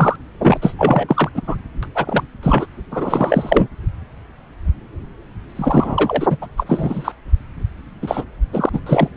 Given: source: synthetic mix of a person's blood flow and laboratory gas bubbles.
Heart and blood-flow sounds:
Doppler ultrasound of blood flow; subclavian vein
0.00-0.16 s: bubbles
0.41-0.57 s: bubbles
0.61-0.74 s: bubbles
0.78-1.29 s: bubbles
1.34-1.42 s: bubbles
1.47-1.56 s: bubbles
1.83-1.88 s: bubbles
1.94-2.23 s: bubbles
2.42-2.66 s: bubbles
2.90-3.67 s: bubbles
5.55-6.37 s: bubbles
6.41-6.47 s: bubbles
6.57-7.12 s: bubbles
8.02-8.25 s: bubbles
8.53-8.70 s: bubbles
8.72-8.80 s: bubbles
8.86-9.09 s: bubbles
From the record:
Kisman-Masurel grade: 333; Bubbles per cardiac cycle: rolling drumbeat, 9 or more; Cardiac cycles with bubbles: 50 to 99%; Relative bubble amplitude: loud (0.450 to 0.775); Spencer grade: 3 (all of the cardiac periods contain showers or single bubble signals, but not dominating or overriding the cardiac motion signals); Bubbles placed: anywhere in the cardiac cycle

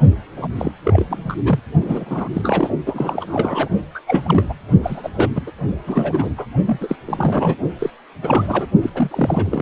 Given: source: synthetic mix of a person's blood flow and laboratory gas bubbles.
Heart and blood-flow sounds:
Doppler ultrasound of blood flow; precordium
0.36-0.47 s: bubbles
0.56-0.71 s: bubbles
0.83-1.05 s: bubbles
1.08-1.35 s: bubbles
1.44-1.59 s: bubbles
1.80-2.28 s: bubbles
2.33-2.69 s: bubbles
2.86-3.69 s: bubbles
3.94-3.99 s: bubbles
4.07-4.53 s: bubbles
4.83-5.10 s: bubbles
5.17-5.29 s: bubbles
5.35-5.42 s: bubbles
5.47-5.52 s: bubbles
5.87-6.33 s: bubbles
6.38-6.46 s: bubbles
6.66-6.97 s: bubbles
7.06-7.56 s: bubbles
7.79-7.90 s: bubbles
8.21-8.67 s: bubbles
8.81-8.90 s: bubbles
8.95-9.62 s: bubbles
From the record:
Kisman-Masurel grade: 342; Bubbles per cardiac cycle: rolling drumbeat, 9 or more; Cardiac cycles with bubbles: 100%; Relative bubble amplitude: moderate (0.250 to 0.450); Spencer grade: 3 (all of the cardiac periods contain showers or single bubble signals, but not dominating or overriding the cardiac motion signals); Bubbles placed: only in the low amplitude regions of the cardiac cycle

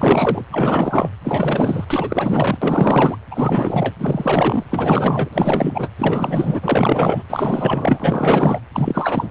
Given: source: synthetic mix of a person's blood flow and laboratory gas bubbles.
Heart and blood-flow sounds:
Doppler ultrasound of blood flow; precordium
0.00-0.45 s: bubbles
0.51-1.09 s: bubbles
1.25-1.84 s: bubbles
1.90-2.58 s: bubbles
2.61-3.17 s: bubbles
3.30-3.95 s: bubbles
3.98-4.64 s: bubbles
4.71-5.29 s: bubbles
5.33-5.89 s: bubbles
5.98-7.23 s: bubbles
7.29-8.60 s: bubbles
8.74-9.30 s: bubbles
From the record:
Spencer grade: 4 (maximum detectable bubble signal sounding continuously throughout systole and diastole of every cardiac period, and overriding the amplitude of the normal cardiac signals); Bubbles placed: anywhere in the cardiac cycle

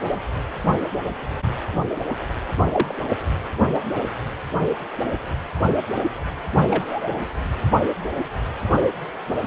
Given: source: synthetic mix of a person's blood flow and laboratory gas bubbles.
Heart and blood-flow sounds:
Doppler ultrasound of blood flow; precordium
2.66-2.95 s: bubbles
6.70-7.10 s: bubbles
From the record:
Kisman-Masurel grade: 122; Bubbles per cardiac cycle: 1 to 2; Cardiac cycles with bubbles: 10 to 50%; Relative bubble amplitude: moderate (0.250 to 0.450); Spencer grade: 2 (many but less than half of the cardiac periods contain bubble signals, singularly or in groups); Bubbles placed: only in the low amplitude regions of the cardiac cycle

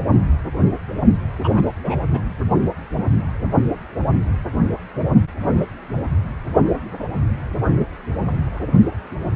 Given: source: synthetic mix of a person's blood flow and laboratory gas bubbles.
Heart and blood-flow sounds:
Doppler ultrasound of blood flow; precordium
1.44-1.52 s: bubbles
1.55-1.64 s: bubbles
1.84-2.04 s: bubbles
2.12-2.22 s: bubbles
From the record:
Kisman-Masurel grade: 212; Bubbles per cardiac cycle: several, 3 to 8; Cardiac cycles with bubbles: 1 to 10%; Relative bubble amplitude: moderate (0.250 to 0.450); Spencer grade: 1 (occasional bubble signal discernible with the cardiac motion signal, with majority of cardiac periods free of bubbles); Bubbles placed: only in the low amplitude regions of the cardiac cycle

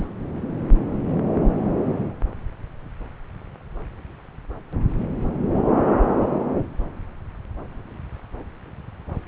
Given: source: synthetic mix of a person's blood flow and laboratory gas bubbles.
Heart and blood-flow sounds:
Doppler ultrasound of blood flow; subclavian vein
0.00-0.06 s: bubbles
From the record:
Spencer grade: 1 (occasional bubble signal discernible with the cardiac motion signal, with majority of cardiac periods free of bubbles); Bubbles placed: anywhere in the cardiac cycle

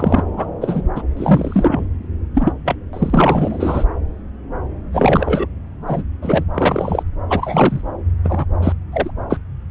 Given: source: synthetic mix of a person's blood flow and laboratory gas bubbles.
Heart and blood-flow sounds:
Doppler ultrasound of blood flow; subclavian vein
0.00-0.23 s: bubbles
0.37-0.46 s: bubbles
0.60-0.83 s: bubbles
0.95-1.02 s: bubbles
1.16-1.85 s: bubbles
2.34-2.52 s: bubbles
2.65-2.75 s: bubbles
2.93-3.86 s: bubbles
4.93-5.47 s: bubbles
5.87-6.03 s: bubbles
6.22-6.45 s: bubbles
6.54-7.03 s: bubbles
7.29-7.82 s: bubbles
8.24-8.45 s: bubbles
8.62-8.72 s: bubbles
8.93-9.11 s: bubbles
9.29-9.38 s: bubbles
From the record:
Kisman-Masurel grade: 233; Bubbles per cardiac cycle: several, 3 to 8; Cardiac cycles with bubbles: 50 to 99%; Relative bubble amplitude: loud (0.450 to 0.775); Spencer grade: 3 (all of the cardiac periods contain showers or single bubble signals, but not dominating or overriding the cardiac motion signals); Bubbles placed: anywhere in the cardiac cycle

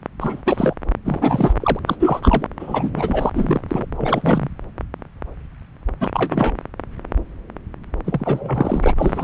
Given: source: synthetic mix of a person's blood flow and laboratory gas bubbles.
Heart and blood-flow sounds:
Doppler ultrasound of blood flow; subclavian vein
0.20-0.42 s: bubbles
0.46-0.74 s: bubbles
1.05-1.54 s: bubbles
1.60-1.79 s: bubbles
1.86-1.96 s: bubbles
2.00-2.47 s: bubbles
2.59-3.30 s: bubbles
3.33-3.61 s: bubbles
3.68-3.85 s: bubbles
3.97-4.49 s: bubbles
6.00-6.55 s: bubbles
8.04-9.24 s: bubbles
From the record:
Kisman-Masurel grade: 333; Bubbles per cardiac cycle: rolling drumbeat, 9 or more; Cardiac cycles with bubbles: 50 to 99%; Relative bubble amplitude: loud (0.450 to 0.775); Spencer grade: 3 (all of the cardiac periods contain showers or single bubble signals, but not dominating or overriding the cardiac motion signals); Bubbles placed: anywhere in the cardiac cycle

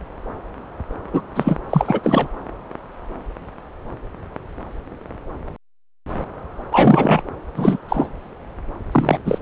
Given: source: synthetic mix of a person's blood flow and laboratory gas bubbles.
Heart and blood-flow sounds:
Doppler ultrasound of blood flow; subclavian vein
1.13-1.23 s: bubbles
1.35-1.59 s: bubbles
1.70-2.00 s: bubbles
2.04-2.29 s: bubbles
6.71-7.21 s: bubbles
7.56-7.78 s: bubbles
7.88-8.10 s: bubbles
8.92-9.19 s: bubbles
9.25-9.38 s: bubbles
From the record:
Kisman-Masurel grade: 223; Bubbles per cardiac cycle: several, 3 to 8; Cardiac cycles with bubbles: 10 to 50%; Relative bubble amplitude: loud (0.450 to 0.775); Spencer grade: 2 (many but less than half of the cardiac periods contain bubble signals, singularly or in groups); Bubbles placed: anywhere in the cardiac cycle

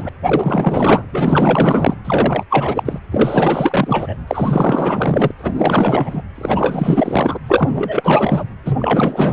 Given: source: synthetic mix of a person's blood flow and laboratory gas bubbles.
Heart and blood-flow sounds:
Doppler ultrasound of blood flow; precordium
0.00-0.09 s: bubbles
0.25-1.03 s: bubbles
1.11-1.95 s: bubbles
2.04-2.45 s: bubbles
2.50-2.99 s: bubbles
3.10-4.17 s: bubbles
4.27-5.31 s: bubbles
5.38-6.21 s: bubbles
6.35-7.38 s: bubbles
7.46-8.45 s: bubbles
8.65-9.33 s: bubbles
From the record:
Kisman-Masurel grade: 444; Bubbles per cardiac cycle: continuous sound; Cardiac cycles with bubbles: 100%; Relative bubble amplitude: maximal (0.775 to 0.999); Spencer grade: 4 (maximum detectable bubble signal sounding continuously throughout systole and diastole of every cardiac period, and overriding the amplitude of the normal cardiac signals); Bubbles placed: anywhere in the cardiac cycle

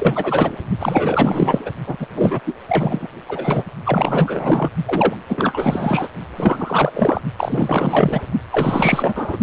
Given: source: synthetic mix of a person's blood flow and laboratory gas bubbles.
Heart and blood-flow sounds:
Doppler ultrasound of blood flow; precordium
0.00-0.56 s: bubbles
0.79-1.71 s: bubbles
1.86-1.97 s: bubbles
1.99-2.08 s: bubbles
2.16-2.41 s: bubbles
2.46-2.54 s: bubbles
2.68-3.08 s: bubbles
3.28-3.64 s: bubbles
3.85-4.71 s: bubbles
4.86-5.16 s: bubbles
5.29-6.08 s: bubbles
6.37-7.22 s: bubbles
7.37-8.22 s: bubbles
8.52-9.38 s: bubbles
From the record:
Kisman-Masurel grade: 444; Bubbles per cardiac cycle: continuous sound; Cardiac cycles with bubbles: 100%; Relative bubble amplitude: maximal (0.775 to 0.999); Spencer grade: 4 (maximum detectable bubble signal sounding continuously throughout systole and diastole of every cardiac period, and overriding the amplitude of the normal cardiac signals); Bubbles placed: only in the low amplitude regions of the cardiac cycle

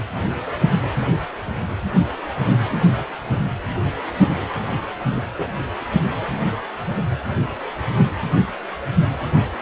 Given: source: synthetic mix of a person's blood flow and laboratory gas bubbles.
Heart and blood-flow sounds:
Doppler ultrasound of blood flow; precordium
5.10-5.24 s: bubbles
5.37-5.48 s: bubbles
From the record:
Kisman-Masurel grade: 112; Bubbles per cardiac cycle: 1 to 2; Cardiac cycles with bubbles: 1 to 10%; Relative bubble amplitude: moderate (0.250 to 0.450); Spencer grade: 1 (occasional bubble signal discernible with the cardiac motion signal, with majority of cardiac periods free of bubbles); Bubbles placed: anywhere in the cardiac cycle

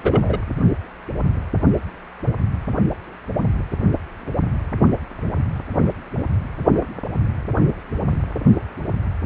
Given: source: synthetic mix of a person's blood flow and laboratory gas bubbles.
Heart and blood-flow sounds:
Doppler ultrasound of blood flow; precordium
0.00-0.38 s: bubbles
From the record:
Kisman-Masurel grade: 213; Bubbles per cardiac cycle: several, 3 to 8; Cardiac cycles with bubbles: 1 to 10%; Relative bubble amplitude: loud (0.450 to 0.775); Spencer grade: 1 (occasional bubble signal discernible with the cardiac motion signal, with majority of cardiac periods free of bubbles); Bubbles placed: anywhere in the cardiac cycle

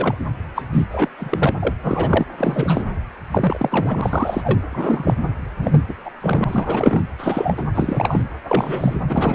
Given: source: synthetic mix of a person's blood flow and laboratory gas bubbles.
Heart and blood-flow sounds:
Doppler ultrasound of blood flow; precordium
0.00-0.15 s: bubbles
0.55-0.62 s: bubbles
0.72-0.86 s: bubbles
0.91-1.08 s: bubbles
1.17-1.55 s: bubbles
1.62-1.74 s: bubbles
1.83-2.23 s: bubbles
2.38-2.83 s: bubbles
3.31-4.59 s: bubbles
4.71-5.16 s: bubbles
5.62-5.82 s: bubbles
5.88-5.95 s: bubbles
6.05-6.11 s: bubbles
6.21-6.44 s: bubbles
6.47-7.01 s: bubbles
7.18-7.63 s: bubbles
7.75-8.23 s: bubbles
8.47-8.97 s: bubbles
9.09-9.35 s: bubbles
From the record:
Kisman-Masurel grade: 343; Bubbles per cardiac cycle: rolling drumbeat, 9 or more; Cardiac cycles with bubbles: 100%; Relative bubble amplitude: loud (0.450 to 0.775); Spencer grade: 3 (all of the cardiac periods contain showers or single bubble signals, but not dominating or overriding the cardiac motion signals); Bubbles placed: anywhere in the cardiac cycle

